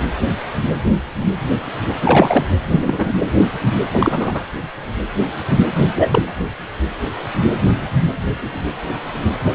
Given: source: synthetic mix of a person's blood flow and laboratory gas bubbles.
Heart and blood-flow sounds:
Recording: Doppler ultrasound of blood flow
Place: precordium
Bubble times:
2.01-2.54 s: bubbles
2.71-3.13 s: bubbles
3.92-4.42 s: bubbles
5.75-6.22 s: bubbles
From the record:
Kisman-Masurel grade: 223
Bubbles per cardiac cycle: several, 3 to 8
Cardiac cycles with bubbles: 10 to 50%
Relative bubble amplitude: loud (0.450 to 0.775)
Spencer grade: 2 (many but less than half of the cardiac periods contain bubble signals, singularly or in groups)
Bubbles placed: anywhere in the cardiac cycle

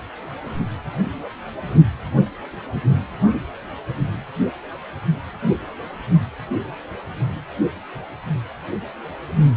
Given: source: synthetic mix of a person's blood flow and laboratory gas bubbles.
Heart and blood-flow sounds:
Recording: Doppler ultrasound of blood flow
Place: precordium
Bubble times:
no bubbles
From the record:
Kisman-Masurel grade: 000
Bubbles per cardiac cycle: 0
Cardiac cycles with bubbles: 0%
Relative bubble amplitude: no bubbles discernible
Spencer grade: 0 (complete lack of bubble signals)

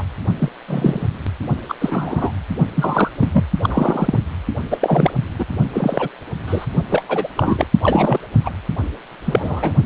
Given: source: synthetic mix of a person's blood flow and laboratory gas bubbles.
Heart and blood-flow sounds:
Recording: Doppler ultrasound of blood flow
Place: precordium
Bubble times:
0.00-0.03 s: bubbles
0.39-0.49 s: bubbles
0.68-1.07 s: bubbles
1.68-1.74 s: bubbles
1.80-2.32 s: bubbles
2.75-3.09 s: bubbles
3.21-3.30 s: bubbles
3.33-3.44 s: bubbles
3.62-4.18 s: bubbles
4.70-4.77 s: bubbles
4.81-5.12 s: bubbles
5.38-5.44 s: bubbles
5.73-6.10 s: bubbles
6.47-6.66 s: bubbles
6.90-7.03 s: bubbles
7.08-7.27 s: bubbles
7.35-7.67 s: bubbles
7.82-8.19 s: bubbles
8.44-8.50 s: bubbles
9.24-9.72 s: bubbles
From the record:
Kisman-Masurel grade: 243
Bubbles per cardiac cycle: several, 3 to 8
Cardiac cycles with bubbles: 100%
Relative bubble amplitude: loud (0.450 to 0.775)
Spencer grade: 3 (all of the cardiac periods contain showers or single bubble signals, but not dominating or overriding the cardiac motion signals)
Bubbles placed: only in the low amplitude regions of the cardiac cycle

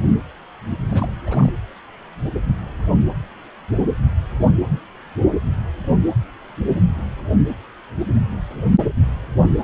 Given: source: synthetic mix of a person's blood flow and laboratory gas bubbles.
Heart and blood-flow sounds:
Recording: Doppler ultrasound of blood flow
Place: precordium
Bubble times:
0.89-1.13 s: bubbles
1.26-1.52 s: bubbles
From the record:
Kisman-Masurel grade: 211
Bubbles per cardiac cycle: several, 3 to 8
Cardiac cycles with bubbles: 1 to 10%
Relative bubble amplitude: barely perceptible (0.100 to 0.250)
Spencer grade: 1 (occasional bubble signal discernible with the cardiac motion signal, with majority of cardiac periods free of bubbles)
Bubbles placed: anywhere in the cardiac cycle

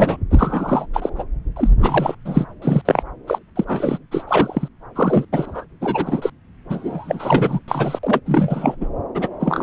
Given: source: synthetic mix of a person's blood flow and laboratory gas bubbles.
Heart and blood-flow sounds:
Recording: Doppler ultrasound of blood flow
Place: subclavian vein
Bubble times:
0.00-0.16 s: bubbles
0.30-0.86 s: bubbles
0.93-1.09 s: bubbles
1.15-1.23 s: bubbles
1.56-1.70 s: bubbles
1.80-2.15 s: bubbles
2.25-2.46 s: bubbles
2.62-2.81 s: bubbles
2.85-3.03 s: bubbles
3.27-3.39 s: bubbles
3.56-3.98 s: bubbles
4.11-4.24 s: bubbles
4.28-4.68 s: bubbles
4.96-5.25 s: bubbles
5.32-5.66 s: bubbles
5.81-6.30 s: bubbles
6.70-7.59 s: bubbles
7.68-7.99 s: bubbles
8.03-8.21 s: bubbles
8.26-8.76 s: bubbles
8.80-8.87 s: bubbles
9.14-9.29 s: bubbles
9.39-9.63 s: bubbles
From the record:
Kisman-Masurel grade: 343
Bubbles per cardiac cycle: rolling drumbeat, 9 or more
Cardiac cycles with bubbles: 100%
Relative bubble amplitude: loud (0.450 to 0.775)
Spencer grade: 3 (all of the cardiac periods contain showers or single bubble signals, but not dominating or overriding the cardiac motion signals)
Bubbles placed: anywhere in the cardiac cycle

